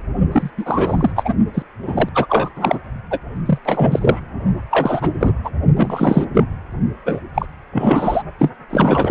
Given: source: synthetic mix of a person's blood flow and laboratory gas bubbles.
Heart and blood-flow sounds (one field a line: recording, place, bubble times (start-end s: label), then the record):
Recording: Doppler ultrasound of blood flow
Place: precordium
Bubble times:
0.32-0.50 s: bubbles
0.57-1.12 s: bubbles
1.16-1.34 s: bubbles
1.54-1.63 s: bubbles
1.82-2.09 s: bubbles
2.15-2.49 s: bubbles
2.56-2.78 s: bubbles
3.10-3.19 s: bubbles
3.45-3.58 s: bubbles
3.65-4.21 s: bubbles
4.71-5.33 s: bubbles
5.44-5.50 s: bubbles
5.77-6.25 s: bubbles
6.33-6.44 s: bubbles
7.06-7.21 s: bubbles
7.34-7.46 s: bubbles
7.72-8.23 s: bubbles
8.38-8.50 s: bubbles
8.70-9.11 s: bubbles
From the record:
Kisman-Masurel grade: 333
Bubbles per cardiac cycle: rolling drumbeat, 9 or more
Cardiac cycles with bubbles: 50 to 99%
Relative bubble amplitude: loud (0.450 to 0.775)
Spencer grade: 3 (all of the cardiac periods contain showers or single bubble signals, but not dominating or overriding the cardiac motion signals)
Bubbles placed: only in the low amplitude regions of the cardiac cycle